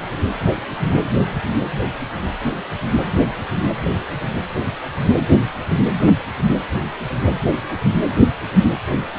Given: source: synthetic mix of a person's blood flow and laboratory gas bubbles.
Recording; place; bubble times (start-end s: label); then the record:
Doppler ultrasound of blood flow; precordium
no bubbles
From the record:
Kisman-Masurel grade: 000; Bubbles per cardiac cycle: 0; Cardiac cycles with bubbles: 0%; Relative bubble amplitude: no bubbles discernible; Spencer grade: 0 (complete lack of bubble signals)